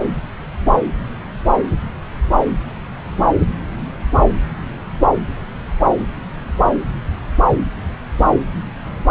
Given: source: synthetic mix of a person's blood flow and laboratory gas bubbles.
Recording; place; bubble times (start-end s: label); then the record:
Doppler ultrasound of blood flow; subclavian vein
no bubbles
From the record:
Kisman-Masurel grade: 000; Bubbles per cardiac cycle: 0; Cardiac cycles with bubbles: 0%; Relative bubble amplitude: no bubbles discernible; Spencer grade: 0 (complete lack of bubble signals)